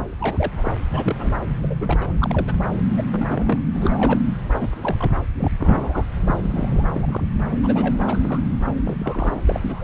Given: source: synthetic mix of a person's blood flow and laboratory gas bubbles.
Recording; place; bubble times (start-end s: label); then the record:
Doppler ultrasound of blood flow; subclavian vein
0.00-0.04 s: bubbles
0.20-0.75 s: bubbles
0.89-1.38 s: bubbles
1.63-1.76 s: bubbles
1.81-2.12 s: bubbles
2.19-2.55 s: bubbles
2.97-3.03 s: bubbles
3.10-3.62 s: bubbles
3.73-4.20 s: bubbles
4.43-4.68 s: bubbles
4.81-5.11 s: bubbles
5.37-5.51 s: bubbles
5.59-6.05 s: bubbles
6.27-6.38 s: bubbles
6.42-6.83 s: bubbles
6.94-7.21 s: bubbles
7.51-7.57 s: bubbles
7.63-8.01 s: bubbles
8.07-8.40 s: bubbles
8.85-9.42 s: bubbles
9.46-9.84 s: bubbles
From the record:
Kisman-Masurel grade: 242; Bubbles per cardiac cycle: several, 3 to 8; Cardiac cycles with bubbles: 100%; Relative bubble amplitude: moderate (0.250 to 0.450); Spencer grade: 3 (all of the cardiac periods contain showers or single bubble signals, but not dominating or overriding the cardiac motion signals); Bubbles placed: anywhere in the cardiac cycle